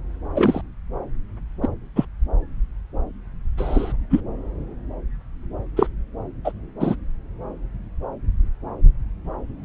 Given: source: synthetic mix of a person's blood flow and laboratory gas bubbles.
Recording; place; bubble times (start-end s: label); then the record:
Doppler ultrasound of blood flow; subclavian vein
0.34-0.61 s: bubbles
1.62-1.68 s: bubbles
1.96-2.05 s: bubbles
3.57-3.93 s: bubbles
4.10-4.21 s: bubbles
5.76-5.88 s: bubbles
6.45-6.52 s: bubbles
6.80-6.96 s: bubbles
From the record:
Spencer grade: 2 (many but less than half of the cardiac periods contain bubble signals, singularly or in groups); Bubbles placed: anywhere in the cardiac cycle